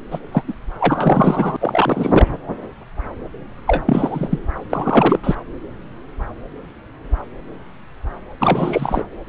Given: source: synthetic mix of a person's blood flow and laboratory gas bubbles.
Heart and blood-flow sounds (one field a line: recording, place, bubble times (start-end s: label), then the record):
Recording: Doppler ultrasound of blood flow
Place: subclavian vein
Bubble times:
0.11-0.19 s: bubbles
0.32-0.42 s: bubbles
0.47-0.53 s: bubbles
0.80-1.56 s: bubbles
1.60-2.28 s: bubbles
3.67-3.82 s: bubbles
3.86-4.39 s: bubbles
4.70-5.19 s: bubbles
5.23-5.35 s: bubbles
8.39-9.04 s: bubbles
From the record:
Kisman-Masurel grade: 223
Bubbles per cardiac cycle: several, 3 to 8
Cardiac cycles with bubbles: 10 to 50%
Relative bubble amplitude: loud (0.450 to 0.775)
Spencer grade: 2 (many but less than half of the cardiac periods contain bubble signals, singularly or in groups)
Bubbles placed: anywhere in the cardiac cycle